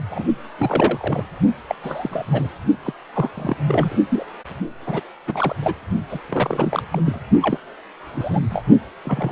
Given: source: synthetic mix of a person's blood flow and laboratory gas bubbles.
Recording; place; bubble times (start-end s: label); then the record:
Doppler ultrasound of blood flow; precordium
0.10-0.26 s: bubbles
0.58-1.25 s: bubbles
1.69-1.75 s: bubbles
1.83-2.48 s: bubbles
2.84-2.94 s: bubbles
3.14-3.57 s: bubbles
3.66-3.97 s: bubbles
4.09-4.26 s: bubbles
4.86-5.02 s: bubbles
5.27-5.55 s: bubbles
5.62-5.73 s: bubbles
6.10-6.20 s: bubbles
6.29-6.82 s: bubbles
6.91-7.01 s: bubbles
7.05-7.21 s: bubbles
7.42-7.58 s: bubbles
8.14-8.39 s: bubbles
8.50-8.64 s: bubbles
9.05-9.32 s: bubbles
From the record:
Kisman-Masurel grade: 242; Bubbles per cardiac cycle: several, 3 to 8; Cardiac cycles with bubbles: 100%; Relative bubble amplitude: moderate (0.250 to 0.450); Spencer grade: 3 (all of the cardiac periods contain showers or single bubble signals, but not dominating or overriding the cardiac motion signals); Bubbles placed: only in the low amplitude regions of the cardiac cycle